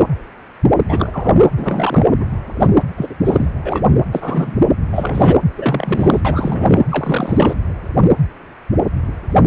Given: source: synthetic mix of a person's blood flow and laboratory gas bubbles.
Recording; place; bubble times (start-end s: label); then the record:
Doppler ultrasound of blood flow; precordium
0.88-1.36 s: bubbles
1.56-2.06 s: bubbles
2.19-2.25 s: bubbles
2.59-2.66 s: bubbles
2.75-2.82 s: bubbles
2.96-3.15 s: bubbles
3.25-3.51 s: bubbles
3.65-3.82 s: bubbles
4.12-4.58 s: bubbles
4.92-5.37 s: bubbles
5.56-6.21 s: bubbles
6.25-6.81 s: bubbles
6.89-7.56 s: bubbles
From the record:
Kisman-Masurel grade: 233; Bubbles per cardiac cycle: several, 3 to 8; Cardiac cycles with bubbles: 50 to 99%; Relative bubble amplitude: loud (0.450 to 0.775); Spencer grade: 3 (all of the cardiac periods contain showers or single bubble signals, but not dominating or overriding the cardiac motion signals); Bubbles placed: anywhere in the cardiac cycle